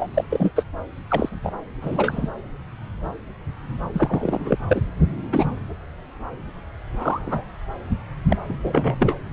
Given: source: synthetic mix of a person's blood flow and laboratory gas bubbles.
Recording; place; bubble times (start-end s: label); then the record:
Doppler ultrasound of blood flow; subclavian vein
0.00-0.08 s: bubbles
0.14-0.24 s: bubbles
0.29-0.51 s: bubbles
0.56-0.65 s: bubbles
1.10-1.29 s: bubbles
1.44-1.52 s: bubbles
1.81-2.29 s: bubbles
3.93-4.58 s: bubbles
4.69-4.81 s: bubbles
5.32-5.45 s: bubbles
6.96-7.45 s: bubbles
8.29-8.37 s: bubbles
8.49-8.58 s: bubbles
8.63-8.96 s: bubbles
9.00-9.17 s: bubbles
From the record:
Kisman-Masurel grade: 232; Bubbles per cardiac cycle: several, 3 to 8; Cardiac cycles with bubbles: 50 to 99%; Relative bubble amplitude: moderate (0.250 to 0.450); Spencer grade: 3 (all of the cardiac periods contain showers or single bubble signals, but not dominating or overriding the cardiac motion signals); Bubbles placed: anywhere in the cardiac cycle